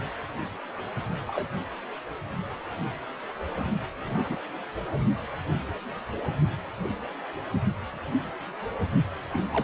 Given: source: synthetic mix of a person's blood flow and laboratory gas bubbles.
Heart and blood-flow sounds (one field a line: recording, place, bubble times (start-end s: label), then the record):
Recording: Doppler ultrasound of blood flow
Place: precordium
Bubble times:
1.27-1.48 s: bubbles
4.05-4.36 s: bubbles
9.33-9.45 s: bubbles
9.53-9.64 s: bubbles
From the record:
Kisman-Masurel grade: 121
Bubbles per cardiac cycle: 1 to 2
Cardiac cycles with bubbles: 10 to 50%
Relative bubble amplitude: barely perceptible (0.100 to 0.250)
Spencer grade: 2 (many but less than half of the cardiac periods contain bubble signals, singularly or in groups)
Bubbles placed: only in the low amplitude regions of the cardiac cycle